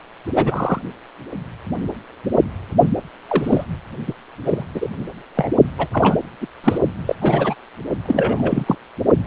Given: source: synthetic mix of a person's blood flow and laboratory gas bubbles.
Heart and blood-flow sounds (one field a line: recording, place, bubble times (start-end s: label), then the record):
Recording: Doppler ultrasound of blood flow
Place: precordium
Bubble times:
0.35-0.82 s: bubbles
3.27-3.64 s: bubbles
4.08-4.14 s: bubbles
4.44-4.63 s: bubbles
4.74-4.88 s: bubbles
5.35-5.51 s: bubbles
5.79-5.87 s: bubbles
5.92-6.16 s: bubbles
6.41-6.46 s: bubbles
6.63-6.78 s: bubbles
7.07-7.15 s: bubbles
7.21-7.54 s: bubbles
8.05-8.75 s: bubbles
From the record:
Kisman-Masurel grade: 232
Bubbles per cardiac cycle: several, 3 to 8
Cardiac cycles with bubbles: 50 to 99%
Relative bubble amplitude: moderate (0.250 to 0.450)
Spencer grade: 3 (all of the cardiac periods contain showers or single bubble signals, but not dominating or overriding the cardiac motion signals)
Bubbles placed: only in the low amplitude regions of the cardiac cycle